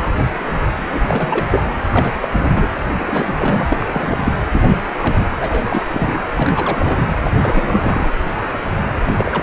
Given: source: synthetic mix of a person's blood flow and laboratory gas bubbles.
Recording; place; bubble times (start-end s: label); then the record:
Doppler ultrasound of blood flow; precordium
0.91-1.67 s: bubbles
1.91-2.18 s: bubbles
2.21-2.28 s: bubbles
2.32-2.69 s: bubbles
2.99-3.66 s: bubbles
3.70-4.33 s: bubbles
4.53-4.77 s: bubbles
4.85-5.26 s: bubbles
5.41-5.89 s: bubbles
5.93-6.20 s: bubbles
6.36-7.08 s: bubbles
7.25-7.31 s: bubbles
7.39-8.11 s: bubbles
9.05-9.42 s: bubbles
From the record:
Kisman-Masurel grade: 332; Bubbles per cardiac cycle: rolling drumbeat, 9 or more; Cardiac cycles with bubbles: 50 to 99%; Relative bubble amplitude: moderate (0.250 to 0.450); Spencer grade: 3 (all of the cardiac periods contain showers or single bubble signals, but not dominating or overriding the cardiac motion signals); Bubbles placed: anywhere in the cardiac cycle